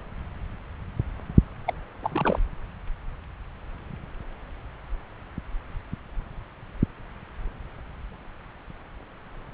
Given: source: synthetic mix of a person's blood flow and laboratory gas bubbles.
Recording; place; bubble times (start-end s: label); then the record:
Doppler ultrasound of blood flow; subclavian vein
1.66-1.74 s: bubbles
2.02-2.39 s: bubbles
From the record:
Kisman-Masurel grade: 212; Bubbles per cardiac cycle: several, 3 to 8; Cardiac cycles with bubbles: 1 to 10%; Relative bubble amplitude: moderate (0.250 to 0.450); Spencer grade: 1 (occasional bubble signal discernible with the cardiac motion signal, with majority of cardiac periods free of bubbles); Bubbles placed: anywhere in the cardiac cycle